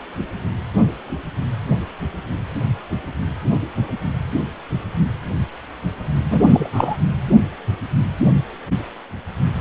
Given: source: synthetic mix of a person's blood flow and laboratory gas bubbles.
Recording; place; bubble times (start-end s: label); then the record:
Doppler ultrasound of blood flow; precordium
6.30-6.68 s: bubbles
6.72-6.97 s: bubbles
From the record:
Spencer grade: 1 (occasional bubble signal discernible with the cardiac motion signal, with majority of cardiac periods free of bubbles); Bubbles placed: anywhere in the cardiac cycle